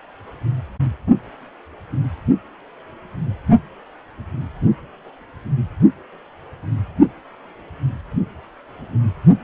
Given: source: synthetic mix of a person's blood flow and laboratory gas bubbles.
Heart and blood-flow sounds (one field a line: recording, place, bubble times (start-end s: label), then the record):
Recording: Doppler ultrasound of blood flow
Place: precordium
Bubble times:
no bubbles
From the record:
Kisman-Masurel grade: 000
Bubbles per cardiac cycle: 0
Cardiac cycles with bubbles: 0%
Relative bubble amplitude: no bubbles discernible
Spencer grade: 0 (complete lack of bubble signals)